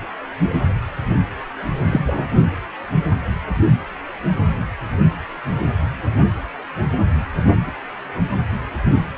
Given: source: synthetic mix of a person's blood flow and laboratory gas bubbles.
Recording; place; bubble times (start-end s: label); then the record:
Doppler ultrasound of blood flow; precordium
1.92-2.00 s: bubbles
2.06-2.24 s: bubbles
From the record:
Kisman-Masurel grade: 113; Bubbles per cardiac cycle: 1 to 2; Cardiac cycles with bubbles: 1 to 10%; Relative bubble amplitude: loud (0.450 to 0.775); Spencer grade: 1 (occasional bubble signal discernible with the cardiac motion signal, with majority of cardiac periods free of bubbles); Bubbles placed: anywhere in the cardiac cycle